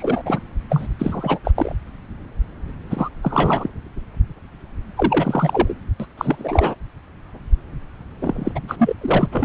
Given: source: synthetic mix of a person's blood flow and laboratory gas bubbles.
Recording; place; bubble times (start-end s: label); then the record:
Doppler ultrasound of blood flow; subclavian vein
0.00-0.23 s: bubbles
0.25-0.40 s: bubbles
0.69-0.88 s: bubbles
0.99-1.39 s: bubbles
1.44-1.51 s: bubbles
1.55-1.75 s: bubbles
2.90-3.08 s: bubbles
3.23-3.70 s: bubbles
4.96-5.74 s: bubbles
6.00-6.06 s: bubbles
6.18-6.75 s: bubbles
8.21-8.51 s: bubbles
8.55-8.59 s: bubbles
8.67-8.93 s: bubbles
9.01-9.26 s: bubbles
9.31-9.45 s: bubbles
From the record:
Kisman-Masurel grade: 333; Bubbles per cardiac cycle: rolling drumbeat, 9 or more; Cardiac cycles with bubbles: 50 to 99%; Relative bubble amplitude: loud (0.450 to 0.775); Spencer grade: 3 (all of the cardiac periods contain showers or single bubble signals, but not dominating or overriding the cardiac motion signals); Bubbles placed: anywhere in the cardiac cycle